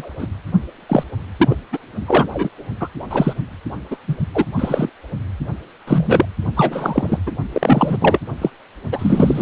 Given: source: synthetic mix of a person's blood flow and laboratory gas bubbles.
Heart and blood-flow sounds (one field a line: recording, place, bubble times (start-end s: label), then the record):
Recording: Doppler ultrasound of blood flow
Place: precordium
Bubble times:
0.00-0.10 s: bubbles
0.18-0.27 s: bubbles
0.89-1.03 s: bubbles
1.39-1.56 s: bubbles
1.72-1.79 s: bubbles
2.06-2.26 s: bubbles
2.33-2.50 s: bubbles
2.80-2.88 s: bubbles
3.10-3.33 s: bubbles
3.91-3.97 s: bubbles
4.08-4.17 s: bubbles
4.34-4.46 s: bubbles
4.56-4.90 s: bubbles
5.87-6.25 s: bubbles
6.57-7.19 s: bubbles
7.26-7.32 s: bubbles
7.53-7.97 s: bubbles
8.00-8.19 s: bubbles
8.41-8.50 s: bubbles
8.92-9.42 s: bubbles
From the record:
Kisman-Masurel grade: 243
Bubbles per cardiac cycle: several, 3 to 8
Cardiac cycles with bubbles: 100%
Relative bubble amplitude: loud (0.450 to 0.775)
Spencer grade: 3 (all of the cardiac periods contain showers or single bubble signals, but not dominating or overriding the cardiac motion signals)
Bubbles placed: only in the low amplitude regions of the cardiac cycle